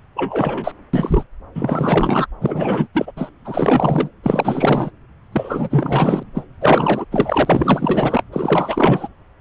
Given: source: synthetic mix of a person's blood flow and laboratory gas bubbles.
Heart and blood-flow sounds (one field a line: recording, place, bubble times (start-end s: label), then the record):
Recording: Doppler ultrasound of blood flow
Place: subclavian vein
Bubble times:
0.16-0.71 s: bubbles
0.93-1.26 s: bubbles
1.54-2.27 s: bubbles
2.40-2.87 s: bubbles
2.94-3.12 s: bubbles
3.17-3.30 s: bubbles
3.44-4.09 s: bubbles
4.23-4.91 s: bubbles
5.32-6.23 s: bubbles
6.34-6.46 s: bubbles
6.61-7.05 s: bubbles
7.11-8.23 s: bubbles
8.32-9.08 s: bubbles
From the record:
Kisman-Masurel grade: 444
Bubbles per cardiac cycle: continuous sound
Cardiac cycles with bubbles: 100%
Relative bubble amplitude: maximal (0.775 to 0.999)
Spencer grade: 4 (maximum detectable bubble signal sounding continuously throughout systole and diastole of every cardiac period, and overriding the amplitude of the normal cardiac signals)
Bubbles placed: anywhere in the cardiac cycle